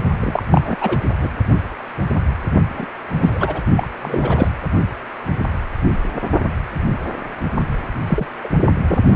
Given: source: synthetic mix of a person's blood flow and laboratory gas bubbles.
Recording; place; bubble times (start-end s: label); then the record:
Doppler ultrasound of blood flow; precordium
0.20-0.43 s: bubbles
0.49-0.76 s: bubbles
0.81-0.97 s: bubbles
1.20-1.29 s: bubbles
2.74-2.86 s: bubbles
3.10-3.62 s: bubbles
3.76-3.88 s: bubbles
4.02-4.48 s: bubbles
8.07-8.27 s: bubbles
8.44-8.49 s: bubbles
8.88-8.99 s: bubbles
From the record:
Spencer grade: 2 (many but less than half of the cardiac periods contain bubble signals, singularly or in groups); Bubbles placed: only in the low amplitude regions of the cardiac cycle